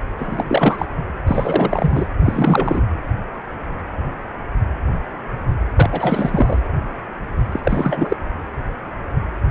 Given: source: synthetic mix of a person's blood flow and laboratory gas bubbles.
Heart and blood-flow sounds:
Doppler ultrasound of blood flow; precordium
0.17-0.45 s: bubbles
0.48-0.86 s: bubbles
1.27-2.07 s: bubbles
2.23-2.81 s: bubbles
5.77-6.58 s: bubbles
7.52-7.60 s: bubbles
7.63-8.16 s: bubbles
From the record:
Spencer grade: 3 (all of the cardiac periods contain showers or single bubble signals, but not dominating or overriding the cardiac motion signals); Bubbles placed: anywhere in the cardiac cycle

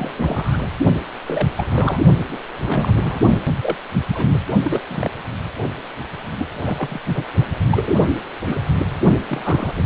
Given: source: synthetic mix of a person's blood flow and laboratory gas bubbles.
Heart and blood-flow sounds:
Doppler ultrasound of blood flow; precordium
0.00-0.11 s: bubbles
0.16-0.69 s: bubbles
1.27-1.52 s: bubbles
1.57-2.02 s: bubbles
2.27-2.38 s: bubbles
2.67-3.19 s: bubbles
3.61-3.76 s: bubbles
4.10-4.31 s: bubbles
4.34-4.38 s: bubbles
4.63-4.80 s: bubbles
4.88-5.10 s: bubbles
6.38-6.46 s: bubbles
6.62-7.00 s: bubbles
7.15-7.24 s: bubbles
7.71-7.95 s: bubbles
8.45-8.61 s: bubbles
9.28-9.75 s: bubbles
9.77-9.82 s: bubbles
From the record:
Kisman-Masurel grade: 242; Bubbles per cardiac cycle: several, 3 to 8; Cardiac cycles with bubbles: 100%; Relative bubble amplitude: moderate (0.250 to 0.450); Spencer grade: 3 (all of the cardiac periods contain showers or single bubble signals, but not dominating or overriding the cardiac motion signals); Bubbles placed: only in the low amplitude regions of the cardiac cycle

